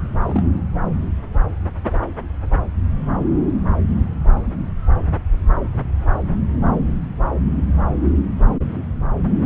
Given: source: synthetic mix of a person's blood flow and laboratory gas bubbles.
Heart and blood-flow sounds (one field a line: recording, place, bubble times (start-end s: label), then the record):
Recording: Doppler ultrasound of blood flow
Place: subclavian vein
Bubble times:
0.21-0.43 s: bubbles
From the record:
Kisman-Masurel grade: 112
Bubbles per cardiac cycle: 1 to 2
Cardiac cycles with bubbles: 1 to 10%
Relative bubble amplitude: moderate (0.250 to 0.450)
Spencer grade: 1 (occasional bubble signal discernible with the cardiac motion signal, with majority of cardiac periods free of bubbles)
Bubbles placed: anywhere in the cardiac cycle